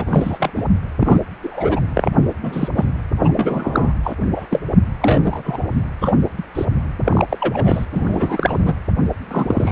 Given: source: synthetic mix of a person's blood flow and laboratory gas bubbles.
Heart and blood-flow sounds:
Doppler ultrasound of blood flow; precordium
0.00-0.49 s: bubbles
0.56-0.64 s: bubbles
1.00-1.21 s: bubbles
1.42-1.81 s: bubbles
1.94-2.10 s: bubbles
2.43-2.69 s: bubbles
2.76-2.85 s: bubbles
3.22-3.32 s: bubbles
3.37-3.92 s: bubbles
4.04-4.15 s: bubbles
4.36-4.46 s: bubbles
4.50-4.61 s: bubbles
5.00-5.66 s: bubbles
5.75-5.81 s: bubbles
6.00-6.17 s: bubbles
6.38-6.42 s: bubbles
6.54-6.66 s: bubbles
7.04-7.25 s: bubbles
7.29-7.86 s: bubbles
7.91-8.73 s: bubbles
9.30-9.71 s: bubbles
From the record:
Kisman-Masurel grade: 243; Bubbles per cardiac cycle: several, 3 to 8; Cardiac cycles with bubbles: 100%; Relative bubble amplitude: loud (0.450 to 0.775); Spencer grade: 3 (all of the cardiac periods contain showers or single bubble signals, but not dominating or overriding the cardiac motion signals); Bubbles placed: anywhere in the cardiac cycle

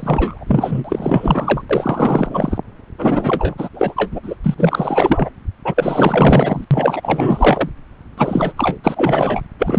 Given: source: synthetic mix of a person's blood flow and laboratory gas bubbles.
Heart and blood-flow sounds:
Doppler ultrasound of blood flow; subclavian vein
0.00-0.45 s: bubbles
0.47-1.62 s: bubbles
1.69-2.58 s: bubbles
2.98-3.54 s: bubbles
3.58-3.69 s: bubbles
3.74-4.20 s: bubbles
4.22-4.35 s: bubbles
4.44-4.54 s: bubbles
4.57-5.30 s: bubbles
5.64-6.64 s: bubbles
6.71-7.69 s: bubbles
8.18-8.53 s: bubbles
8.57-8.78 s: bubbles
8.84-9.41 s: bubbles
9.59-9.79 s: bubbles
From the record:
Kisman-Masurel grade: 444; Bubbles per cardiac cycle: continuous sound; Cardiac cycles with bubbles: 100%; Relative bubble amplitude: maximal (0.775 to 0.999); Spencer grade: 4 (maximum detectable bubble signal sounding continuously throughout systole and diastole of every cardiac period, and overriding the amplitude of the normal cardiac signals); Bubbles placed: anywhere in the cardiac cycle

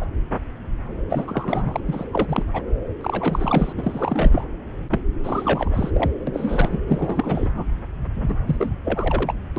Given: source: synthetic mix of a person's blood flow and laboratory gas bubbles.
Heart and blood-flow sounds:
Doppler ultrasound of blood flow; subclavian vein
0.01-0.05 s: bubbles
1.09-1.80 s: bubbles
1.86-2.05 s: bubbles
2.12-2.45 s: bubbles
2.53-2.62 s: bubbles
3.01-3.73 s: bubbles
3.77-4.50 s: bubbles
4.91-5.00 s: bubbles
5.23-5.69 s: bubbles
5.72-5.90 s: bubbles
5.94-6.10 s: bubbles
6.27-6.81 s: bubbles
6.88-7.49 s: bubbles
7.54-7.64 s: bubbles
8.13-8.36 s: bubbles
8.47-8.74 s: bubbles
8.84-9.34 s: bubbles
9.56-9.59 s: bubbles
From the record:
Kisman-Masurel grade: 332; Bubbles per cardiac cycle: rolling drumbeat, 9 or more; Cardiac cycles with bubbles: 50 to 99%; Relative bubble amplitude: moderate (0.250 to 0.450); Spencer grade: 3 (all of the cardiac periods contain showers or single bubble signals, but not dominating or overriding the cardiac motion signals); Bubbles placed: anywhere in the cardiac cycle

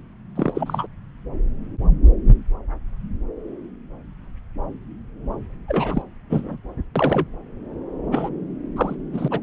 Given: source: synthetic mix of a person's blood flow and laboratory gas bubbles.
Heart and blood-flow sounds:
Doppler ultrasound of blood flow; subclavian vein
0.36-0.86 s: bubbles
5.68-6.04 s: bubbles
6.30-6.58 s: bubbles
6.96-7.27 s: bubbles
8.12-8.29 s: bubbles
8.76-8.95 s: bubbles
9.13-9.28 s: bubbles
9.30-9.40 s: bubbles
From the record:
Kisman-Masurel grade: 232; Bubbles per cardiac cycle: several, 3 to 8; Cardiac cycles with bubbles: 50 to 99%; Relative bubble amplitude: moderate (0.250 to 0.450); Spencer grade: 3 (all of the cardiac periods contain showers or single bubble signals, but not dominating or overriding the cardiac motion signals); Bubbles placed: anywhere in the cardiac cycle

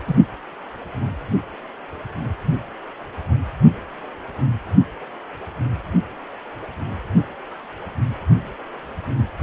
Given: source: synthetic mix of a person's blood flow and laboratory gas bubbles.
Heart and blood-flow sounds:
Doppler ultrasound of blood flow; precordium
0.07-0.15 s: bubbles
From the record:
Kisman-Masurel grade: 123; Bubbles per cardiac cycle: 1 to 2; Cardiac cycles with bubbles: 10 to 50%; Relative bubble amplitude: loud (0.450 to 0.775); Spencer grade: 2 (many but less than half of the cardiac periods contain bubble signals, singularly or in groups); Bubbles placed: only in the low amplitude regions of the cardiac cycle

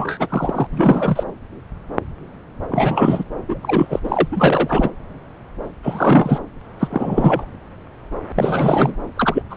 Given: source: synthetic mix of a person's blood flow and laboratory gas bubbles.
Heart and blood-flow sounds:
Doppler ultrasound of blood flow; subclavian vein
0.00-0.67 s: bubbles
0.71-1.23 s: bubbles
2.69-3.25 s: bubbles
3.48-3.99 s: bubbles
4.04-4.28 s: bubbles
4.31-4.90 s: bubbles
5.83-6.41 s: bubbles
6.79-7.45 s: bubbles
8.35-8.95 s: bubbles
9.16-9.42 s: bubbles
9.50-9.57 s: bubbles
From the record:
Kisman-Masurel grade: 333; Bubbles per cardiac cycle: rolling drumbeat, 9 or more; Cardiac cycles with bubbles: 50 to 99%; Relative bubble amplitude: loud (0.450 to 0.775); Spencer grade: 3 (all of the cardiac periods contain showers or single bubble signals, but not dominating or overriding the cardiac motion signals); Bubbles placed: anywhere in the cardiac cycle

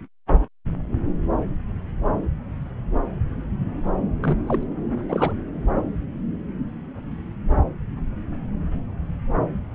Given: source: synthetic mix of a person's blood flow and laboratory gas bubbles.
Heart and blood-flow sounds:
Doppler ultrasound of blood flow; subclavian vein
4.21-4.37 s: bubbles
4.47-4.63 s: bubbles
5.08-5.33 s: bubbles
From the record:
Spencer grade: 2 (many but less than half of the cardiac periods contain bubble signals, singularly or in groups); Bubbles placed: anywhere in the cardiac cycle

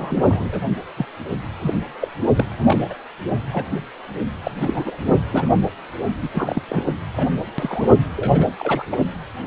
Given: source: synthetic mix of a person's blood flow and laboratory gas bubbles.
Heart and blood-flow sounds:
Doppler ultrasound of blood flow; precordium
0.00-0.23 s: bubbles
0.28-0.48 s: bubbles
0.52-0.61 s: bubbles
0.97-1.06 s: bubbles
1.61-1.78 s: bubbles
2.00-2.08 s: bubbles
2.35-2.47 s: bubbles
2.67-2.79 s: bubbles
2.90-2.94 s: bubbles
3.47-3.69 s: bubbles
4.44-4.51 s: bubbles
4.60-4.96 s: bubbles
5.05-5.14 s: bubbles
5.31-5.52 s: bubbles
6.22-6.29 s: bubbles
6.31-6.62 s: bubbles
6.68-6.93 s: bubbles
7.13-7.29 s: bubbles
7.58-7.89 s: bubbles
8.16-8.47 s: bubbles
8.59-8.85 s: bubbles
8.91-8.98 s: bubbles
From the record:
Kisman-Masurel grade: 242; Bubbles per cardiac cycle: several, 3 to 8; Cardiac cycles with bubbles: 100%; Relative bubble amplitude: moderate (0.250 to 0.450); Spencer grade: 3 (all of the cardiac periods contain showers or single bubble signals, but not dominating or overriding the cardiac motion signals); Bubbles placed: anywhere in the cardiac cycle

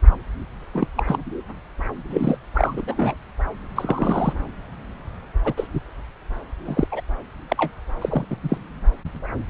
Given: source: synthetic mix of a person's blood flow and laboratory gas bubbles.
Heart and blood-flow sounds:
Doppler ultrasound of blood flow; subclavian vein
0.73-0.87 s: bubbles
0.96-1.03 s: bubbles
1.07-1.18 s: bubbles
2.10-2.37 s: bubbles
2.54-2.81 s: bubbles
2.87-3.15 s: bubbles
3.76-4.33 s: bubbles
5.44-5.53 s: bubbles
5.56-5.67 s: bubbles
5.73-5.80 s: bubbles
6.65-6.88 s: bubbles
6.92-7.01 s: bubbles
7.48-7.71 s: bubbles
8.01-8.25 s: bubbles
8.30-8.37 s: bubbles
8.42-8.57 s: bubbles
From the record:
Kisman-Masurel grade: 232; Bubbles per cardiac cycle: several, 3 to 8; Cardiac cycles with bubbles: 50 to 99%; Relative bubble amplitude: moderate (0.250 to 0.450); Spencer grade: 3 (all of the cardiac periods contain showers or single bubble signals, but not dominating or overriding the cardiac motion signals); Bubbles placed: anywhere in the cardiac cycle

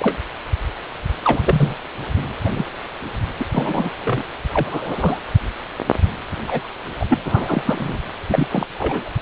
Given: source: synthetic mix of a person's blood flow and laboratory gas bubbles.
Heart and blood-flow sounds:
Doppler ultrasound of blood flow; precordium
0.00-0.17 s: bubbles
1.24-1.74 s: bubbles
2.44-2.49 s: bubbles
2.54-2.65 s: bubbles
3.38-3.44 s: bubbles
3.52-3.90 s: bubbles
4.04-4.23 s: bubbles
4.53-5.20 s: bubbles
6.47-6.68 s: bubbles
7.00-7.06 s: bubbles
7.09-7.18 s: bubbles
7.24-7.63 s: bubbles
7.65-7.97 s: bubbles
8.27-8.66 s: bubbles
8.78-9.14 s: bubbles
From the record:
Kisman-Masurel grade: 242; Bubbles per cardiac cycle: several, 3 to 8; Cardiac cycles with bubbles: 100%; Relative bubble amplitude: moderate (0.250 to 0.450); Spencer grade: 3 (all of the cardiac periods contain showers or single bubble signals, but not dominating or overriding the cardiac motion signals); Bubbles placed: anywhere in the cardiac cycle

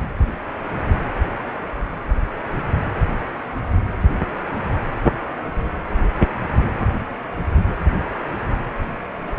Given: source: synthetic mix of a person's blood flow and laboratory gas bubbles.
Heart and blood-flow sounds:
Doppler ultrasound of blood flow; precordium
no bubbles
From the record:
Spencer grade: 0 (complete lack of bubble signals)

